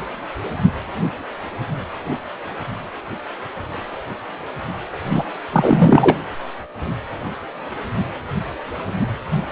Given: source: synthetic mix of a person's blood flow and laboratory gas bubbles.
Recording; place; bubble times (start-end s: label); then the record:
Doppler ultrasound of blood flow; precordium
5.06-5.25 s: bubbles
5.52-6.18 s: bubbles
From the record:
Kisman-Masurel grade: 213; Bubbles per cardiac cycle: several, 3 to 8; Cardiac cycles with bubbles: 1 to 10%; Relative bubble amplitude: loud (0.450 to 0.775); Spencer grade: 1 (occasional bubble signal discernible with the cardiac motion signal, with majority of cardiac periods free of bubbles); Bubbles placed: anywhere in the cardiac cycle